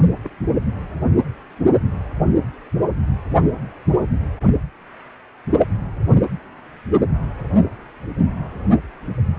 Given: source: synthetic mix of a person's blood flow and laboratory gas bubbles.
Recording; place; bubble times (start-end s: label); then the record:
Doppler ultrasound of blood flow; precordium
0.18-0.30 s: bubbles
From the record:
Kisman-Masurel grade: 211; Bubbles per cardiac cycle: several, 3 to 8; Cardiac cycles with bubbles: 1 to 10%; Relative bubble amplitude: barely perceptible (0.100 to 0.250); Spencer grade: 1 (occasional bubble signal discernible with the cardiac motion signal, with majority of cardiac periods free of bubbles); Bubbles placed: only in the low amplitude regions of the cardiac cycle